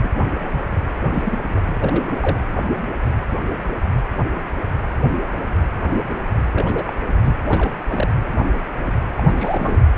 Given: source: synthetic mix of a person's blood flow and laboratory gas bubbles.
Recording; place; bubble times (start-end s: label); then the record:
Doppler ultrasound of blood flow; precordium
0.03-0.09 s: bubbles
0.33-0.48 s: bubbles
0.53-0.60 s: bubbles
1.12-1.38 s: bubbles
1.54-1.60 s: bubbles
1.74-2.14 s: bubbles
2.20-2.40 s: bubbles
6.52-6.92 s: bubbles
7.23-7.34 s: bubbles
7.45-7.77 s: bubbles
7.88-8.08 s: bubbles
9.18-9.23 s: bubbles
9.27-9.87 s: bubbles
9.94-9.98 s: bubbles
From the record:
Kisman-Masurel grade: 221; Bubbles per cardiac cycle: several, 3 to 8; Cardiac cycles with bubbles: 10 to 50%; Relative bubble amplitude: barely perceptible (0.100 to 0.250); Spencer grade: 2 (many but less than half of the cardiac periods contain bubble signals, singularly or in groups); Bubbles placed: anywhere in the cardiac cycle